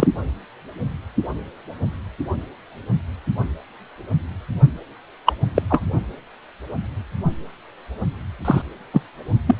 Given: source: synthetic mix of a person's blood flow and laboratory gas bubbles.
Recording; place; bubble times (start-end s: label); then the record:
Doppler ultrasound of blood flow; precordium
0.00-0.07 s: bubbles
5.26-5.33 s: bubbles
5.54-5.62 s: bubbles
5.70-5.81 s: bubbles
8.45-8.62 s: bubbles
8.93-9.02 s: bubbles
9.46-9.54 s: bubbles
From the record:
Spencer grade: 2 (many but less than half of the cardiac periods contain bubble signals, singularly or in groups); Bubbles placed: anywhere in the cardiac cycle